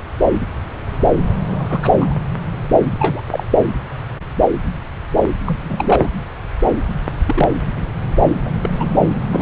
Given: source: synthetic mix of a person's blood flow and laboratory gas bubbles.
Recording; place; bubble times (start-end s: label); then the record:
Doppler ultrasound of blood flow; subclavian vein
1.47-1.80 s: bubbles
1.82-1.93 s: bubbles
2.00-2.14 s: bubbles
2.99-3.22 s: bubbles
3.28-3.43 s: bubbles
3.50-3.58 s: bubbles
5.46-6.09 s: bubbles
7.26-7.48 s: bubbles
7.75-7.84 s: bubbles
8.17-8.21 s: bubbles
8.45-8.53 s: bubbles
8.62-8.70 s: bubbles
8.79-8.87 s: bubbles
9.31-9.42 s: bubbles
From the record:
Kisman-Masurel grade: 232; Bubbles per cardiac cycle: several, 3 to 8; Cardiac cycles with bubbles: 50 to 99%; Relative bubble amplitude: moderate (0.250 to 0.450); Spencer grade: 3 (all of the cardiac periods contain showers or single bubble signals, but not dominating or overriding the cardiac motion signals); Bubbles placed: anywhere in the cardiac cycle